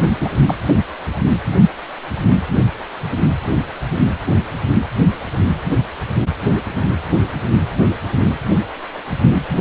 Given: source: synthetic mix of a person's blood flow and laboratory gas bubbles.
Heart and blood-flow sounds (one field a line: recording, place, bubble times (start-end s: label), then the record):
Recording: Doppler ultrasound of blood flow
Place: precordium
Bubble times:
0.00-0.04 s: bubbles
0.20-0.30 s: bubbles
0.47-0.55 s: bubbles
0.68-0.73 s: bubbles
From the record:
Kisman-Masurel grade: 213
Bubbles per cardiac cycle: several, 3 to 8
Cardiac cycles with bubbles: 1 to 10%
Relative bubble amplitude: loud (0.450 to 0.775)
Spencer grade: 1 (occasional bubble signal discernible with the cardiac motion signal, with majority of cardiac periods free of bubbles)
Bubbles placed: anywhere in the cardiac cycle